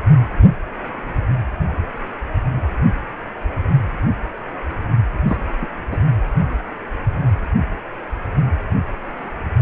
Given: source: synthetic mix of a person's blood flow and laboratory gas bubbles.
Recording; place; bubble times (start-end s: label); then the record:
Doppler ultrasound of blood flow; precordium
5.28-5.38 s: bubbles
5.61-5.67 s: bubbles
5.91-5.99 s: bubbles
From the record:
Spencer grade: 1 (occasional bubble signal discernible with the cardiac motion signal, with majority of cardiac periods free of bubbles); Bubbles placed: anywhere in the cardiac cycle